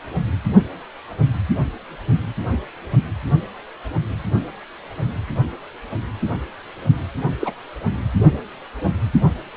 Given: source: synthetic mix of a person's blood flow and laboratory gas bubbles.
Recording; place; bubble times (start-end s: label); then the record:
Doppler ultrasound of blood flow; precordium
7.40-7.54 s: bubbles
From the record:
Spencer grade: 1 (occasional bubble signal discernible with the cardiac motion signal, with majority of cardiac periods free of bubbles); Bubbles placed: only in the low amplitude regions of the cardiac cycle